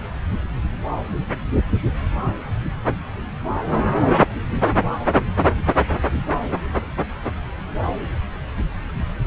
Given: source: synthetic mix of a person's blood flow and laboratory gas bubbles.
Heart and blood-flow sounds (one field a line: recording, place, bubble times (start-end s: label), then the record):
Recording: Doppler ultrasound of blood flow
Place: subclavian vein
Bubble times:
no bubbles
From the record:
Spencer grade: 0 (complete lack of bubble signals)